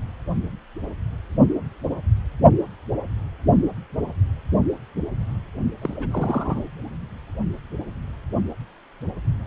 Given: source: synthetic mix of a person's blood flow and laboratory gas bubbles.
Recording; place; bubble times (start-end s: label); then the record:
Doppler ultrasound of blood flow; precordium
5.81-6.65 s: bubbles
From the record:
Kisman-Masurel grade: 211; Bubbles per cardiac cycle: several, 3 to 8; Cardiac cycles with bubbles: 1 to 10%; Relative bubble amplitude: barely perceptible (0.100 to 0.250); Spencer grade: 1 (occasional bubble signal discernible with the cardiac motion signal, with majority of cardiac periods free of bubbles); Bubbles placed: only in the low amplitude regions of the cardiac cycle